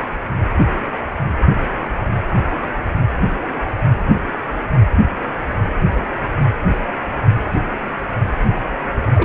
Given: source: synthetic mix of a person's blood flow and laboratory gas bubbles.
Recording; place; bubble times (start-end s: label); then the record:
Doppler ultrasound of blood flow; precordium
9.14-9.25 s: bubbles
From the record:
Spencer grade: 1 (occasional bubble signal discernible with the cardiac motion signal, with majority of cardiac periods free of bubbles); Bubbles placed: anywhere in the cardiac cycle